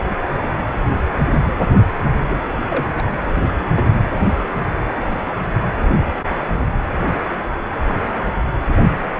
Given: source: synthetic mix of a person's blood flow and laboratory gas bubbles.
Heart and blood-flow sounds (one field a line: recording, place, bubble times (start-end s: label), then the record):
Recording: Doppler ultrasound of blood flow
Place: precordium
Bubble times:
2.29-2.35 s: bubbles
2.68-2.88 s: bubbles
2.98-3.08 s: bubbles
3.57-3.93 s: bubbles
From the record:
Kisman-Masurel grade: 122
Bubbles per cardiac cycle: 1 to 2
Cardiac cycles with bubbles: 10 to 50%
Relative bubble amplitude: moderate (0.250 to 0.450)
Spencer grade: 2 (many but less than half of the cardiac periods contain bubble signals, singularly or in groups)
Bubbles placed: anywhere in the cardiac cycle